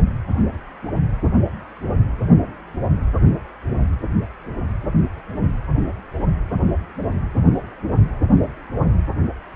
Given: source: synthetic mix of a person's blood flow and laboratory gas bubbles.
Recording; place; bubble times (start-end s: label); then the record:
Doppler ultrasound of blood flow; precordium
no bubbles
From the record:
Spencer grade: 0 (complete lack of bubble signals)